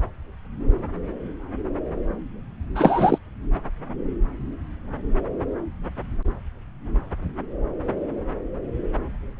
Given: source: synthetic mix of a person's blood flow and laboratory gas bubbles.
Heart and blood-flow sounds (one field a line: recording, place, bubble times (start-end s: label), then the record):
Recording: Doppler ultrasound of blood flow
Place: subclavian vein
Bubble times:
2.75-3.18 s: bubbles
From the record:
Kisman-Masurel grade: 213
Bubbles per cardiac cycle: several, 3 to 8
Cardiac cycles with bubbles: 1 to 10%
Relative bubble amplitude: loud (0.450 to 0.775)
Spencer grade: 1 (occasional bubble signal discernible with the cardiac motion signal, with majority of cardiac periods free of bubbles)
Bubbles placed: anywhere in the cardiac cycle